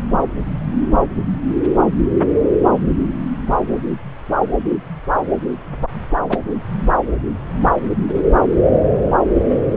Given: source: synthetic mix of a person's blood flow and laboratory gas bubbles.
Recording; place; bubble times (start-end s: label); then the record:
Doppler ultrasound of blood flow; subclavian vein
6.29-6.38 s: bubbles
9.49-9.58 s: bubbles
From the record:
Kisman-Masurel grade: 123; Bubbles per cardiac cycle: 1 to 2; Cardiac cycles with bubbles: 10 to 50%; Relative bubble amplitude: loud (0.450 to 0.775); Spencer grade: 2 (many but less than half of the cardiac periods contain bubble signals, singularly or in groups); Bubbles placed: anywhere in the cardiac cycle